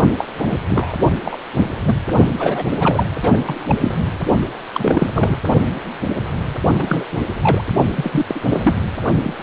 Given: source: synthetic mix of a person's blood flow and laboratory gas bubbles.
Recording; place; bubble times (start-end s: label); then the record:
Doppler ultrasound of blood flow; precordium
0.18-0.26 s: bubbles
0.38-0.59 s: bubbles
0.69-0.93 s: bubbles
1.24-1.38 s: bubbles
1.55-1.70 s: bubbles
1.85-1.95 s: bubbles
2.39-2.65 s: bubbles
2.79-3.05 s: bubbles
3.23-3.38 s: bubbles
3.45-3.78 s: bubbles
3.81-4.04 s: bubbles
4.73-5.38 s: bubbles
6.78-7.05 s: bubbles
7.12-7.19 s: bubbles
7.42-7.64 s: bubbles
7.96-8.40 s: bubbles
8.48-8.76 s: bubbles
9.23-9.37 s: bubbles
From the record:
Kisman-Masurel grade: 332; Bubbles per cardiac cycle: rolling drumbeat, 9 or more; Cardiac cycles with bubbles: 50 to 99%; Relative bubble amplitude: moderate (0.250 to 0.450); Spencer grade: 3 (all of the cardiac periods contain showers or single bubble signals, but not dominating or overriding the cardiac motion signals); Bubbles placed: only in the low amplitude regions of the cardiac cycle